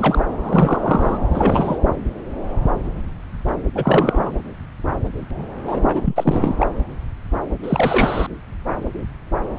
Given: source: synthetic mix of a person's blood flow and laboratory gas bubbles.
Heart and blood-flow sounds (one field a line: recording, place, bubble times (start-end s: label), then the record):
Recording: Doppler ultrasound of blood flow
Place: subclavian vein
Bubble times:
0.00-0.24 s: bubbles
0.43-1.18 s: bubbles
1.33-1.77 s: bubbles
3.75-4.31 s: bubbles
5.65-5.80 s: bubbles
5.88-6.01 s: bubbles
6.05-6.55 s: bubbles
6.59-6.67 s: bubbles
7.63-8.27 s: bubbles
From the record:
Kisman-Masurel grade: 233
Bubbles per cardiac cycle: several, 3 to 8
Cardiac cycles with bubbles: 50 to 99%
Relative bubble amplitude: loud (0.450 to 0.775)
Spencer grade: 3 (all of the cardiac periods contain showers or single bubble signals, but not dominating or overriding the cardiac motion signals)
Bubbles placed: anywhere in the cardiac cycle